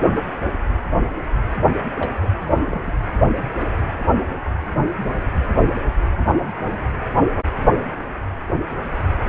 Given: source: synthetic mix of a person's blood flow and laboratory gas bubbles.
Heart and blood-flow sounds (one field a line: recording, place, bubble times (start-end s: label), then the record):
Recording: Doppler ultrasound of blood flow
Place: precordium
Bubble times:
1.95-2.10 s: bubbles
2.23-2.29 s: bubbles
2.41-2.61 s: bubbles
2.67-2.92 s: bubbles
From the record:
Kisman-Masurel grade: 221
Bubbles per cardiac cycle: several, 3 to 8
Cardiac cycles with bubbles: 10 to 50%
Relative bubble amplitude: barely perceptible (0.100 to 0.250)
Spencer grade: 2 (many but less than half of the cardiac periods contain bubble signals, singularly or in groups)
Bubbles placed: anywhere in the cardiac cycle